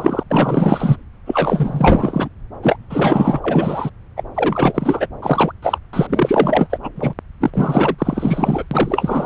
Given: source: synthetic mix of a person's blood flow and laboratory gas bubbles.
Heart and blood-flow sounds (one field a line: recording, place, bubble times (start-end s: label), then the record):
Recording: Doppler ultrasound of blood flow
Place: subclavian vein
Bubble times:
0.00-0.23 s: bubbles
0.30-0.97 s: bubbles
1.27-2.28 s: bubbles
2.62-2.77 s: bubbles
2.90-3.90 s: bubbles
4.17-4.23 s: bubbles
4.34-5.07 s: bubbles
5.22-5.52 s: bubbles
5.62-5.78 s: bubbles
5.93-6.78 s: bubbles
6.82-6.89 s: bubbles
6.95-7.13 s: bubbles
7.40-7.50 s: bubbles
7.54-7.95 s: bubbles
7.98-8.65 s: bubbles
8.71-9.26 s: bubbles
From the record:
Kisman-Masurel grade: 444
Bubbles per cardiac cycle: continuous sound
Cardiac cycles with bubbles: 100%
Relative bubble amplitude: maximal (0.775 to 0.999)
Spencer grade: 4 (maximum detectable bubble signal sounding continuously throughout systole and diastole of every cardiac period, and overriding the amplitude of the normal cardiac signals)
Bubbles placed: anywhere in the cardiac cycle